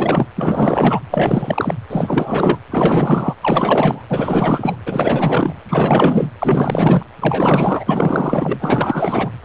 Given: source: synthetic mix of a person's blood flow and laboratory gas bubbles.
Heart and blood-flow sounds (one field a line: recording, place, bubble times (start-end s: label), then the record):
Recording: Doppler ultrasound of blood flow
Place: precordium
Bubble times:
0.00-0.27 s: bubbles
0.36-1.01 s: bubbles
1.10-1.74 s: bubbles
1.90-2.58 s: bubbles
2.71-3.34 s: bubbles
3.41-4.02 s: bubbles
4.09-4.76 s: bubbles
4.86-5.54 s: bubbles
5.68-6.27 s: bubbles
6.40-7.03 s: bubbles
7.21-9.29 s: bubbles
9.41-9.45 s: bubbles
From the record:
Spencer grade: 4 (maximum detectable bubble signal sounding continuously throughout systole and diastole of every cardiac period, and overriding the amplitude of the normal cardiac signals)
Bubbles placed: anywhere in the cardiac cycle